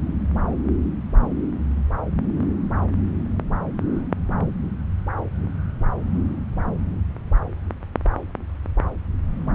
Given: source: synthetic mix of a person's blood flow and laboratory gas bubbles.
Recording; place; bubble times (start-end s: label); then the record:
Doppler ultrasound of blood flow; subclavian vein
no bubbles
From the record:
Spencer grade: 0 (complete lack of bubble signals)